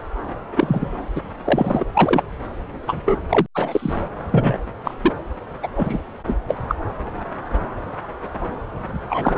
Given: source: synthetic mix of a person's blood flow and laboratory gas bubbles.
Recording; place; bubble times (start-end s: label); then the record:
Doppler ultrasound of blood flow; subclavian vein
0.57-0.93 s: bubbles
1.15-1.21 s: bubbles
1.44-1.85 s: bubbles
1.93-2.23 s: bubbles
2.87-3.20 s: bubbles
3.29-3.47 s: bubbles
3.54-3.93 s: bubbles
4.29-4.58 s: bubbles
4.84-4.94 s: bubbles
5.02-5.12 s: bubbles
5.62-5.67 s: bubbles
5.75-5.97 s: bubbles
6.26-6.36 s: bubbles
6.47-6.57 s: bubbles
6.67-6.75 s: bubbles
9.10-9.38 s: bubbles
From the record:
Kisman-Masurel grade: 233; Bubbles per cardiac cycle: several, 3 to 8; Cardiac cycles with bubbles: 50 to 99%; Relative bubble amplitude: loud (0.450 to 0.775); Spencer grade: 3 (all of the cardiac periods contain showers or single bubble signals, but not dominating or overriding the cardiac motion signals); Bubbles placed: anywhere in the cardiac cycle